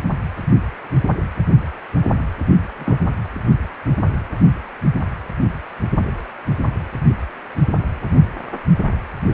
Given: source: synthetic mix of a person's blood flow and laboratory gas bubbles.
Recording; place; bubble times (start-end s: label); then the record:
Doppler ultrasound of blood flow; precordium
2.79-2.97 s: bubbles
From the record:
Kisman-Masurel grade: 112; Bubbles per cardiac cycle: 1 to 2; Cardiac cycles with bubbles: 1 to 10%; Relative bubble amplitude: moderate (0.250 to 0.450); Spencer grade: 1 (occasional bubble signal discernible with the cardiac motion signal, with majority of cardiac periods free of bubbles); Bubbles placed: only in the low amplitude regions of the cardiac cycle